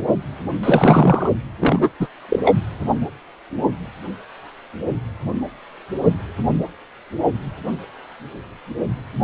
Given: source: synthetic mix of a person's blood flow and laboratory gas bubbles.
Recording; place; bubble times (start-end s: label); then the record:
Doppler ultrasound of blood flow; precordium
0.63-1.30 s: bubbles
1.60-1.90 s: bubbles
2.00-2.08 s: bubbles
2.29-2.39 s: bubbles
2.44-2.54 s: bubbles
From the record:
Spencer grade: 2 (many but less than half of the cardiac periods contain bubble signals, singularly or in groups); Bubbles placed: anywhere in the cardiac cycle